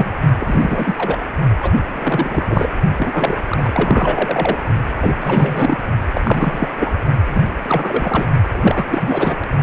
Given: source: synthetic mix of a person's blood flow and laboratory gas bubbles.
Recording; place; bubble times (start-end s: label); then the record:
Doppler ultrasound of blood flow; precordium
0.00-0.12 s: bubbles
0.39-0.94 s: bubbles
0.97-1.18 s: bubbles
1.60-1.72 s: bubbles
1.92-2.69 s: bubbles
2.97-3.43 s: bubbles
3.48-4.58 s: bubbles
4.99-5.15 s: bubbles
5.20-5.77 s: bubbles
6.14-6.68 s: bubbles
6.80-6.95 s: bubbles
7.28-7.40 s: bubbles
7.62-8.28 s: bubbles
8.52-9.35 s: bubbles
From the record:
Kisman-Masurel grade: 343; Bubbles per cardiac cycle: rolling drumbeat, 9 or more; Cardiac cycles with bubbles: 100%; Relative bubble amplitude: loud (0.450 to 0.775); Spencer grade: 3 (all of the cardiac periods contain showers or single bubble signals, but not dominating or overriding the cardiac motion signals); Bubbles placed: only in the low amplitude regions of the cardiac cycle